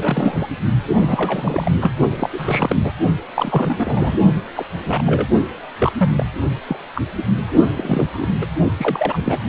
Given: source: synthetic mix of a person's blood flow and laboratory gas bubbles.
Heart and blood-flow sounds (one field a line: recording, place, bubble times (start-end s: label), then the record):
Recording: Doppler ultrasound of blood flow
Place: precordium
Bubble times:
0.00-0.49 s: bubbles
0.94-1.72 s: bubbles
1.79-1.91 s: bubbles
2.17-2.29 s: bubbles
2.33-2.76 s: bubbles
2.84-2.92 s: bubbles
3.35-4.17 s: bubbles
4.54-4.65 s: bubbles
4.85-5.03 s: bubbles
5.06-5.27 s: bubbles
5.79-5.92 s: bubbles
5.97-6.10 s: bubbles
6.16-6.25 s: bubbles
6.68-6.77 s: bubbles
6.95-7.01 s: bubbles
7.17-7.24 s: bubbles
7.75-8.07 s: bubbles
8.12-8.30 s: bubbles
8.41-8.46 s: bubbles
8.77-9.40 s: bubbles
From the record:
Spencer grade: 3 (all of the cardiac periods contain showers or single bubble signals, but not dominating or overriding the cardiac motion signals)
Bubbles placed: only in the low amplitude regions of the cardiac cycle